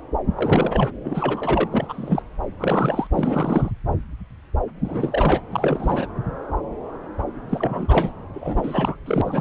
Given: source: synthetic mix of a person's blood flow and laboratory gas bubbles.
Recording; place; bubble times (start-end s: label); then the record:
Doppler ultrasound of blood flow; subclavian vein
0.36-0.92 s: bubbles
1.04-1.68 s: bubbles
1.71-2.23 s: bubbles
2.58-3.07 s: bubbles
3.12-3.71 s: bubbles
4.84-5.42 s: bubbles
5.52-6.07 s: bubbles
7.50-8.12 s: bubbles
8.34-8.96 s: bubbles
9.06-9.41 s: bubbles
From the record:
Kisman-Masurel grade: 332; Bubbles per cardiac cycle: rolling drumbeat, 9 or more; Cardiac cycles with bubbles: 50 to 99%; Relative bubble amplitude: moderate (0.250 to 0.450); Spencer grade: 3 (all of the cardiac periods contain showers or single bubble signals, but not dominating or overriding the cardiac motion signals); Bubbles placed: anywhere in the cardiac cycle